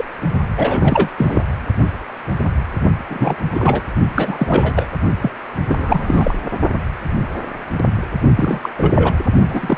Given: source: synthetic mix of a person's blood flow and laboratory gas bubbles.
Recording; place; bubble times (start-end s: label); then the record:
Doppler ultrasound of blood flow; precordium
0.00-0.05 s: bubbles
0.56-1.08 s: bubbles
1.17-1.43 s: bubbles
3.09-3.35 s: bubbles
3.54-3.88 s: bubbles
4.16-4.88 s: bubbles
5.21-5.32 s: bubbles
5.67-6.34 s: bubbles
8.35-8.60 s: bubbles
8.62-8.70 s: bubbles
8.77-9.13 s: bubbles
9.47-9.77 s: bubbles
From the record:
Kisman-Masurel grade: 333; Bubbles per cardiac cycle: rolling drumbeat, 9 or more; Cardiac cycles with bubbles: 50 to 99%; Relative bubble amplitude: loud (0.450 to 0.775); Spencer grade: 3 (all of the cardiac periods contain showers or single bubble signals, but not dominating or overriding the cardiac motion signals); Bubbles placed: only in the low amplitude regions of the cardiac cycle